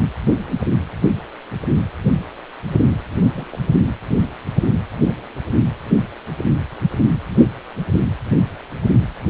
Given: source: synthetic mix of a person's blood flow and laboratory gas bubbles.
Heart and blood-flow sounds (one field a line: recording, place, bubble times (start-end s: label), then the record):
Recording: Doppler ultrasound of blood flow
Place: precordium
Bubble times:
3.35-3.45 s: bubbles
3.50-3.59 s: bubbles
From the record:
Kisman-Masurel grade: 211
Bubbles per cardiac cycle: several, 3 to 8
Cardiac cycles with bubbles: 1 to 10%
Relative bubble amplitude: barely perceptible (0.100 to 0.250)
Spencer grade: 1 (occasional bubble signal discernible with the cardiac motion signal, with majority of cardiac periods free of bubbles)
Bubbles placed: anywhere in the cardiac cycle